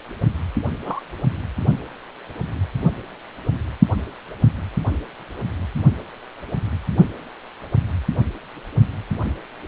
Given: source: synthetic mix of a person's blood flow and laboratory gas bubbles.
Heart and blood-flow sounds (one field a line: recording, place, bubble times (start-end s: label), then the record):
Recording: Doppler ultrasound of blood flow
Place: precordium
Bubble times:
0.83-1.01 s: bubbles
From the record:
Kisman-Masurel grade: 111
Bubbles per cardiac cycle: 1 to 2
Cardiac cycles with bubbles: 1 to 10%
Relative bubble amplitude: barely perceptible (0.100 to 0.250)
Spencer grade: 1 (occasional bubble signal discernible with the cardiac motion signal, with majority of cardiac periods free of bubbles)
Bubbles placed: only in the low amplitude regions of the cardiac cycle